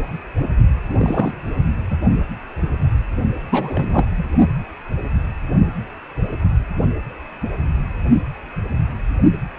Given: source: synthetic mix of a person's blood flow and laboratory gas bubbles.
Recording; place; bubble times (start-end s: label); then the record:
Doppler ultrasound of blood flow; precordium
0.89-1.36 s: bubbles
1.90-1.97 s: bubbles
3.51-4.05 s: bubbles
4.17-4.25 s: bubbles
From the record:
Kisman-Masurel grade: 222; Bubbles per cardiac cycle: several, 3 to 8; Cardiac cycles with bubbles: 10 to 50%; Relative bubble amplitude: moderate (0.250 to 0.450); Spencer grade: 2 (many but less than half of the cardiac periods contain bubble signals, singularly or in groups); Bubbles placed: only in the low amplitude regions of the cardiac cycle